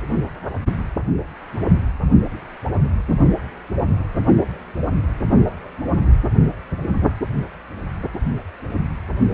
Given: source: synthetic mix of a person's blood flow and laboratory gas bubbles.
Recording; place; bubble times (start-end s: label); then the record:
Doppler ultrasound of blood flow; precordium
no bubbles
From the record:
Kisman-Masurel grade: 000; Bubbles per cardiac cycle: 0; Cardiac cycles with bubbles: 0%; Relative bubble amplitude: no bubbles discernible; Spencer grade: 0 (complete lack of bubble signals)